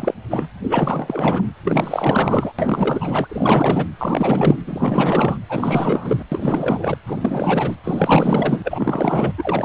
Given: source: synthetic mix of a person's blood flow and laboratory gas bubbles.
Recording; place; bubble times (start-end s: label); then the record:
Doppler ultrasound of blood flow; precordium
0.00-0.14 s: bubbles
0.30-0.47 s: bubbles
0.62-1.44 s: bubbles
1.64-2.52 s: bubbles
2.58-3.85 s: bubbles
3.97-4.56 s: bubbles
4.67-5.37 s: bubbles
5.49-6.23 s: bubbles
6.32-6.96 s: bubbles
7.05-7.76 s: bubbles
7.83-9.33 s: bubbles
9.37-9.64 s: bubbles
From the record:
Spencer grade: 4 (maximum detectable bubble signal sounding continuously throughout systole and diastole of every cardiac period, and overriding the amplitude of the normal cardiac signals); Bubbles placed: anywhere in the cardiac cycle